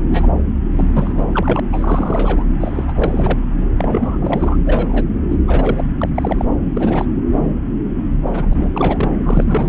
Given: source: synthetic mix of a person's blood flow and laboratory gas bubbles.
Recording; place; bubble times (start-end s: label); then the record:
Doppler ultrasound of blood flow; subclavian vein
0.00-0.05 s: bubbles
0.08-0.28 s: bubbles
0.72-1.60 s: bubbles
1.72-2.44 s: bubbles
2.60-2.85 s: bubbles
2.88-3.39 s: bubbles
3.77-4.57 s: bubbles
4.65-5.04 s: bubbles
5.29-5.37 s: bubbles
5.47-5.83 s: bubbles
5.98-6.09 s: bubbles
6.15-6.45 s: bubbles
6.74-7.05 s: bubbles
8.26-8.68 s: bubbles
8.74-9.11 s: bubbles
9.19-9.69 s: bubbles
From the record:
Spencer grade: 3 (all of the cardiac periods contain showers or single bubble signals, but not dominating or overriding the cardiac motion signals); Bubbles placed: anywhere in the cardiac cycle